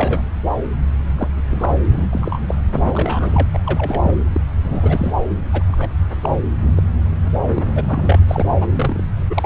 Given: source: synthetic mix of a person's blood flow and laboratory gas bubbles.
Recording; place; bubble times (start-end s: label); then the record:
Doppler ultrasound of blood flow; subclavian vein
0.00-0.23 s: bubbles
1.16-1.27 s: bubbles
1.36-1.41 s: bubbles
1.48-1.77 s: bubbles
1.85-2.07 s: bubbles
2.10-2.39 s: bubbles
2.48-2.56 s: bubbles
2.72-2.79 s: bubbles
2.83-3.48 s: bubbles
3.54-3.58 s: bubbles
3.66-4.17 s: bubbles
4.33-4.41 s: bubbles
4.64-5.12 s: bubbles
5.53-5.63 s: bubbles
5.67-5.94 s: bubbles
6.21-6.29 s: bubbles
6.62-6.72 s: bubbles
6.76-6.83 s: bubbles
7.54-7.62 s: bubbles
7.75-8.19 s: bubbles
8.28-8.46 s: bubbles
8.51-8.67 s: bubbles
8.76-9.03 s: bubbles
9.29-9.46 s: bubbles
From the record:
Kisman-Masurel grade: 242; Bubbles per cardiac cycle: several, 3 to 8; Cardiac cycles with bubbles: 100%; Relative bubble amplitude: moderate (0.250 to 0.450); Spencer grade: 3 (all of the cardiac periods contain showers or single bubble signals, but not dominating or overriding the cardiac motion signals); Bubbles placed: anywhere in the cardiac cycle